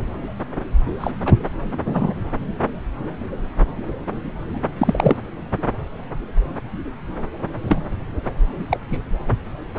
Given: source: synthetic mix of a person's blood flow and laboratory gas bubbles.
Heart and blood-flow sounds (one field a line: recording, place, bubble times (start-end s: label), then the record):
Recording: Doppler ultrasound of blood flow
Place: subclavian vein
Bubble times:
1.00-1.11 s: bubbles
1.25-1.35 s: bubbles
1.85-2.13 s: bubbles
4.78-5.17 s: bubbles
7.67-7.81 s: bubbles
8.71-8.78 s: bubbles
8.90-8.97 s: bubbles
From the record:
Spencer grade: 2 (many but less than half of the cardiac periods contain bubble signals, singularly or in groups)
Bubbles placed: anywhere in the cardiac cycle